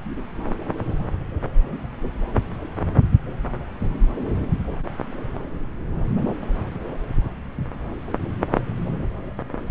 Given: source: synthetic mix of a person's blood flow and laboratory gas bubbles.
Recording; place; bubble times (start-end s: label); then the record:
Doppler ultrasound of blood flow; subclavian vein
no bubbles
From the record:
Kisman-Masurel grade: 000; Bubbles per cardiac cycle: 0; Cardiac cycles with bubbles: 0%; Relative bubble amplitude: no bubbles discernible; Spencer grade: 0 (complete lack of bubble signals)